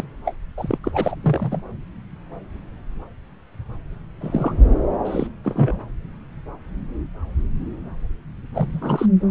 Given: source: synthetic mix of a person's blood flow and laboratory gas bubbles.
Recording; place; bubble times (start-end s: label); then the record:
Doppler ultrasound of blood flow; subclavian vein
0.00-0.04 s: bubbles
0.26-0.34 s: bubbles
0.57-0.78 s: bubbles
0.83-1.15 s: bubbles
1.23-1.62 s: bubbles
4.21-4.71 s: bubbles
5.05-5.30 s: bubbles
5.44-5.79 s: bubbles
8.54-9.06 s: bubbles
From the record:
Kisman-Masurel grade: 232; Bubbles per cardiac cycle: several, 3 to 8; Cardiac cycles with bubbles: 50 to 99%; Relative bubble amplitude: moderate (0.250 to 0.450); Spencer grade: 3 (all of the cardiac periods contain showers or single bubble signals, but not dominating or overriding the cardiac motion signals); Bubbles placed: anywhere in the cardiac cycle